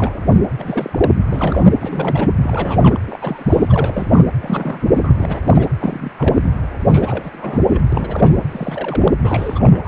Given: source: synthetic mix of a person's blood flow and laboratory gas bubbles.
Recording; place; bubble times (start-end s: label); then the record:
Doppler ultrasound of blood flow; precordium
0.00-0.17 s: bubbles
0.25-0.39 s: bubbles
0.58-1.12 s: bubbles
1.29-1.70 s: bubbles
1.80-2.32 s: bubbles
2.42-2.98 s: bubbles
3.07-4.22 s: bubbles
4.40-5.12 s: bubbles
5.18-5.69 s: bubbles
5.80-6.12 s: bubbles
6.17-6.49 s: bubbles
6.88-7.83 s: bubbles
7.92-8.42 s: bubbles
8.50-9.15 s: bubbles
9.24-9.81 s: bubbles
9.84-9.88 s: bubbles
From the record:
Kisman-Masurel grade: 342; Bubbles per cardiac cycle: rolling drumbeat, 9 or more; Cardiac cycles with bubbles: 100%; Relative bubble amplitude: moderate (0.250 to 0.450); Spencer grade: 3 (all of the cardiac periods contain showers or single bubble signals, but not dominating or overriding the cardiac motion signals); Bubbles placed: anywhere in the cardiac cycle